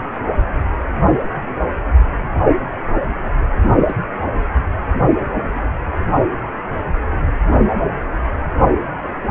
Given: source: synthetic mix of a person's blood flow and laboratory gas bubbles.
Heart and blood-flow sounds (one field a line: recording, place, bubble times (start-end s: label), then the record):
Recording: Doppler ultrasound of blood flow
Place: precordium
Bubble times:
3.87-3.95 s: bubbles
From the record:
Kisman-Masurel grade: 112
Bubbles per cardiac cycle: 1 to 2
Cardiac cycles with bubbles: 1 to 10%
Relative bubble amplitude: moderate (0.250 to 0.450)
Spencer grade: 1 (occasional bubble signal discernible with the cardiac motion signal, with majority of cardiac periods free of bubbles)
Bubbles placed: anywhere in the cardiac cycle